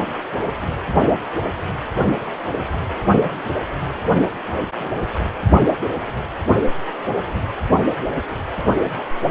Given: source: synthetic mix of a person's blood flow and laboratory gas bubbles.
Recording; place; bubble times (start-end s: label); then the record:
Doppler ultrasound of blood flow; precordium
4.78-5.09 s: bubbles
From the record:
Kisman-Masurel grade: 121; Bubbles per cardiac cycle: 1 to 2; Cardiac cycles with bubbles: 10 to 50%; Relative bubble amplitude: barely perceptible (0.100 to 0.250); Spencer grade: 2 (many but less than half of the cardiac periods contain bubble signals, singularly or in groups); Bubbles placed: only in the low amplitude regions of the cardiac cycle